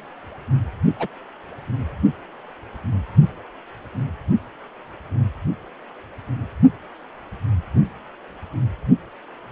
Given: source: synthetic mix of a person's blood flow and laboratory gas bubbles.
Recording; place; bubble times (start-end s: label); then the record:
Doppler ultrasound of blood flow; precordium
0.99-1.08 s: bubbles
From the record:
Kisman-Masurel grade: 112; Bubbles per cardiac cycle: 1 to 2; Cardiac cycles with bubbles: 1 to 10%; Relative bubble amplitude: moderate (0.250 to 0.450); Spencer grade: 1 (occasional bubble signal discernible with the cardiac motion signal, with majority of cardiac periods free of bubbles); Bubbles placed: only in the low amplitude regions of the cardiac cycle